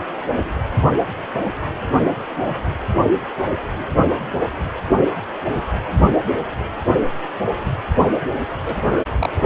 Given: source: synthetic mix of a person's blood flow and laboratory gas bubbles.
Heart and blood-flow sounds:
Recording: Doppler ultrasound of blood flow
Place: precordium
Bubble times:
8.64-8.76 s: bubbles
8.80-9.02 s: bubbles
9.12-9.46 s: bubbles
From the record:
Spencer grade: 1 (occasional bubble signal discernible with the cardiac motion signal, with majority of cardiac periods free of bubbles)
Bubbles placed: anywhere in the cardiac cycle

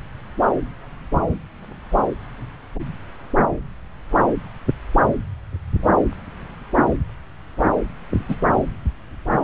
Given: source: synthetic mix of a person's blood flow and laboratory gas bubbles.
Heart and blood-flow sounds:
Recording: Doppler ultrasound of blood flow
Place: subclavian vein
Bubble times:
8.28-8.36 s: bubbles
From the record:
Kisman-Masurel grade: 112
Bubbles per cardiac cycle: 1 to 2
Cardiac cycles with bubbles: 1 to 10%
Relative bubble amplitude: moderate (0.250 to 0.450)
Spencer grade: 1 (occasional bubble signal discernible with the cardiac motion signal, with majority of cardiac periods free of bubbles)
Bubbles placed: anywhere in the cardiac cycle

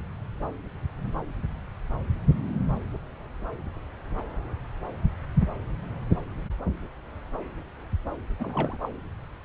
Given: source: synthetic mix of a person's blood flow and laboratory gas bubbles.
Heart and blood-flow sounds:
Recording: Doppler ultrasound of blood flow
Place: subclavian vein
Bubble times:
8.39-8.78 s: bubbles
8.81-8.89 s: bubbles
From the record:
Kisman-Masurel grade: 211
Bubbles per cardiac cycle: several, 3 to 8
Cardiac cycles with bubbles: 1 to 10%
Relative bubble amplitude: barely perceptible (0.100 to 0.250)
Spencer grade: 1 (occasional bubble signal discernible with the cardiac motion signal, with majority of cardiac periods free of bubbles)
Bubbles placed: anywhere in the cardiac cycle

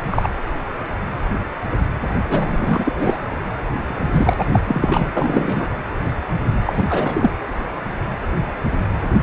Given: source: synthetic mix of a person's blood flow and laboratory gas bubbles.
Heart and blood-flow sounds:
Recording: Doppler ultrasound of blood flow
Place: precordium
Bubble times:
0.10-0.28 s: bubbles
2.29-3.22 s: bubbles
3.50-3.53 s: bubbles
3.88-4.33 s: bubbles
4.38-4.45 s: bubbles
4.53-5.09 s: bubbles
5.13-5.67 s: bubbles
6.65-7.31 s: bubbles
From the record:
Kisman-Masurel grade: 233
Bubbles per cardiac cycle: several, 3 to 8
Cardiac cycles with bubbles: 50 to 99%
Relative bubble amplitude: loud (0.450 to 0.775)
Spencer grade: 3 (all of the cardiac periods contain showers or single bubble signals, but not dominating or overriding the cardiac motion signals)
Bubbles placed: anywhere in the cardiac cycle

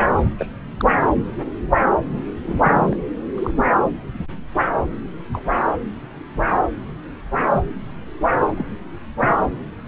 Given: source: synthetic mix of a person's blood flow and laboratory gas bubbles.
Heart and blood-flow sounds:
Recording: Doppler ultrasound of blood flow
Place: subclavian vein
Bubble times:
0.39-0.46 s: bubbles
0.80-0.85 s: bubbles
2.45-2.95 s: bubbles
3.35-3.51 s: bubbles
5.32-5.46 s: bubbles
8.57-8.80 s: bubbles
9.20-9.35 s: bubbles
From the record:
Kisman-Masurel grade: 121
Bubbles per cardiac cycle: 1 to 2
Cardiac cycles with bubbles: 10 to 50%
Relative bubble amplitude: barely perceptible (0.100 to 0.250)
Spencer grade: 2 (many but less than half of the cardiac periods contain bubble signals, singularly or in groups)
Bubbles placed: anywhere in the cardiac cycle

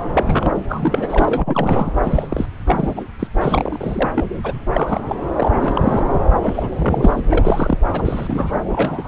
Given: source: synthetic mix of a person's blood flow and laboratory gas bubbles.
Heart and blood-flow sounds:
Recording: Doppler ultrasound of blood flow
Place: subclavian vein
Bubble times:
0.13-0.53 s: bubbles
0.68-1.93 s: bubbles
2.04-2.46 s: bubbles
2.67-3.02 s: bubbles
3.19-3.28 s: bubbles
3.41-4.08 s: bubbles
4.14-4.31 s: bubbles
4.44-4.65 s: bubbles
4.73-5.01 s: bubbles
5.07-5.16 s: bubbles
5.36-5.52 s: bubbles
5.57-6.11 s: bubbles
6.42-7.21 s: bubbles
7.25-7.78 s: bubbles
7.92-8.52 s: bubbles
8.72-9.08 s: bubbles
From the record:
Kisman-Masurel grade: 342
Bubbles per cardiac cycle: rolling drumbeat, 9 or more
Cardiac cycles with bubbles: 100%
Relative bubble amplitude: moderate (0.250 to 0.450)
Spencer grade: 3 (all of the cardiac periods contain showers or single bubble signals, but not dominating or overriding the cardiac motion signals)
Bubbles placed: anywhere in the cardiac cycle

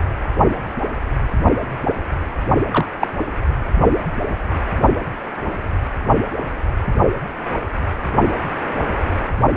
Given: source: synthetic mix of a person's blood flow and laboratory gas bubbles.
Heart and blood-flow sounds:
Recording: Doppler ultrasound of blood flow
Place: precordium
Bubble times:
2.72-2.85 s: bubbles
2.99-3.07 s: bubbles
From the record:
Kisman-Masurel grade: 113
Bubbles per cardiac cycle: 1 to 2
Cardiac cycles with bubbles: 1 to 10%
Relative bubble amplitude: loud (0.450 to 0.775)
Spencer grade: 1 (occasional bubble signal discernible with the cardiac motion signal, with majority of cardiac periods free of bubbles)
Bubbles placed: only in the low amplitude regions of the cardiac cycle

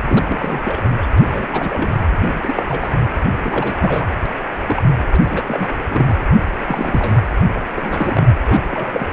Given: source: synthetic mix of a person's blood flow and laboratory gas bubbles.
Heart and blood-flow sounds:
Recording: Doppler ultrasound of blood flow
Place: precordium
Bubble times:
0.08-0.92 s: bubbles
1.02-1.07 s: bubbles
1.18-1.70 s: bubbles
1.72-1.90 s: bubbles
2.19-2.95 s: bubbles
3.41-4.08 s: bubbles
4.59-4.83 s: bubbles
5.12-5.19 s: bubbles
5.30-5.70 s: bubbles
5.91-6.16 s: bubbles
6.65-7.21 s: bubbles
7.48-7.63 s: bubbles
7.74-8.33 s: bubbles
8.47-9.07 s: bubbles
From the record:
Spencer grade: 3 (all of the cardiac periods contain showers or single bubble signals, but not dominating or overriding the cardiac motion signals)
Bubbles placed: anywhere in the cardiac cycle

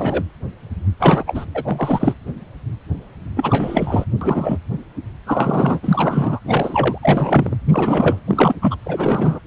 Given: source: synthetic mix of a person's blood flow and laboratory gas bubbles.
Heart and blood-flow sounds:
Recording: Doppler ultrasound of blood flow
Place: precordium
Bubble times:
0.00-0.23 s: bubbles
1.00-1.24 s: bubbles
1.27-1.45 s: bubbles
1.54-2.14 s: bubbles
3.36-4.05 s: bubbles
4.21-4.58 s: bubbles
5.26-6.39 s: bubbles
6.45-6.98 s: bubbles
7.02-7.57 s: bubbles
7.68-8.21 s: bubbles
8.27-8.55 s: bubbles
8.62-8.76 s: bubbles
8.85-9.39 s: bubbles
From the record:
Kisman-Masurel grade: 332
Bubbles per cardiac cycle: rolling drumbeat, 9 or more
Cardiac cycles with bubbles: 50 to 99%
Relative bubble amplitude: moderate (0.250 to 0.450)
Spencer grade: 3 (all of the cardiac periods contain showers or single bubble signals, but not dominating or overriding the cardiac motion signals)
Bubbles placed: anywhere in the cardiac cycle

